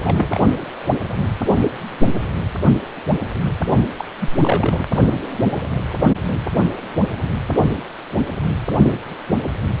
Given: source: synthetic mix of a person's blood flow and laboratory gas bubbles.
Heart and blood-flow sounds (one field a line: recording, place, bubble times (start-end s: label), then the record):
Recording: Doppler ultrasound of blood flow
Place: precordium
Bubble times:
0.00-0.39 s: bubbles
3.98-4.05 s: bubbles
4.21-4.29 s: bubbles
4.41-4.86 s: bubbles
From the record:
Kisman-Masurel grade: 222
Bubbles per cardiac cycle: several, 3 to 8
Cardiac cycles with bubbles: 10 to 50%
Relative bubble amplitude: moderate (0.250 to 0.450)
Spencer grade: 2 (many but less than half of the cardiac periods contain bubble signals, singularly or in groups)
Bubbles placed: only in the low amplitude regions of the cardiac cycle